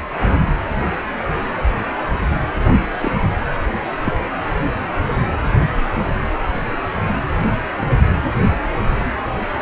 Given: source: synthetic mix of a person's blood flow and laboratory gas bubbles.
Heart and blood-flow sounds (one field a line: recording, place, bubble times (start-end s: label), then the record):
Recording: Doppler ultrasound of blood flow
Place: precordium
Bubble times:
2.64-2.75 s: bubbles
3.02-3.11 s: bubbles
4.04-4.12 s: bubbles
From the record:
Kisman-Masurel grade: 122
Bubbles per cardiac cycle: 1 to 2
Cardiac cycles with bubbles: 10 to 50%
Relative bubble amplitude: moderate (0.250 to 0.450)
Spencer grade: 2 (many but less than half of the cardiac periods contain bubble signals, singularly or in groups)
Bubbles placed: anywhere in the cardiac cycle